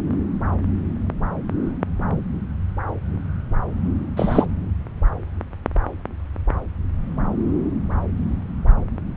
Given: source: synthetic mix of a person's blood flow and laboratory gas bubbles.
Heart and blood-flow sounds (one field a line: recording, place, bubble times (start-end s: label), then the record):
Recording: Doppler ultrasound of blood flow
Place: subclavian vein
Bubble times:
4.16-4.46 s: bubbles
From the record:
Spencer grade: 1 (occasional bubble signal discernible with the cardiac motion signal, with majority of cardiac periods free of bubbles)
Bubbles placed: anywhere in the cardiac cycle